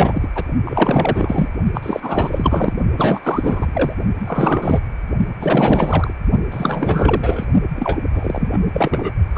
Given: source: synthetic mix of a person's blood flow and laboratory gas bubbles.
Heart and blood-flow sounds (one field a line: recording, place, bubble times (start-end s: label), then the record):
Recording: Doppler ultrasound of blood flow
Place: precordium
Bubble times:
0.00-0.28 s: bubbles
0.34-0.44 s: bubbles
0.65-1.49 s: bubbles
1.73-2.77 s: bubbles
2.96-3.20 s: bubbles
3.23-3.93 s: bubbles
4.20-4.80 s: bubbles
5.40-6.14 s: bubbles
6.51-7.46 s: bubbles
7.76-8.01 s: bubbles
8.13-8.59 s: bubbles
8.73-9.12 s: bubbles
9.35-9.38 s: bubbles
From the record:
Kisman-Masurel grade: 444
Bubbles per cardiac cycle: continuous sound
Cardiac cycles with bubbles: 100%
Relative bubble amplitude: maximal (0.775 to 0.999)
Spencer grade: 4 (maximum detectable bubble signal sounding continuously throughout systole and diastole of every cardiac period, and overriding the amplitude of the normal cardiac signals)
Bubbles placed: only in the low amplitude regions of the cardiac cycle